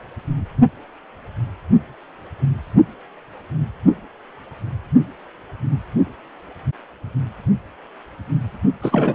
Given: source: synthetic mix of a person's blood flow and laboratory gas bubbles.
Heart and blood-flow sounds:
Doppler ultrasound of blood flow; precordium
8.82-9.15 s: bubbles
From the record:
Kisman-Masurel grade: 213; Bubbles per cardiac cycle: several, 3 to 8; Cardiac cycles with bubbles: 1 to 10%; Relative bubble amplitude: loud (0.450 to 0.775); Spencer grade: 1 (occasional bubble signal discernible with the cardiac motion signal, with majority of cardiac periods free of bubbles); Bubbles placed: only in the low amplitude regions of the cardiac cycle

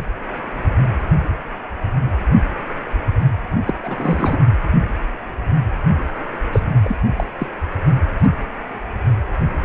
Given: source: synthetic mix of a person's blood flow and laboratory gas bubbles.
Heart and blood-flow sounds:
Doppler ultrasound of blood flow; precordium
3.65-3.74 s: bubbles
3.84-4.38 s: bubbles
6.53-6.60 s: bubbles
6.83-6.96 s: bubbles
7.16-7.24 s: bubbles
7.38-7.47 s: bubbles
8.24-8.28 s: bubbles
From the record:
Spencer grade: 2 (many but less than half of the cardiac periods contain bubble signals, singularly or in groups); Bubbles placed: anywhere in the cardiac cycle

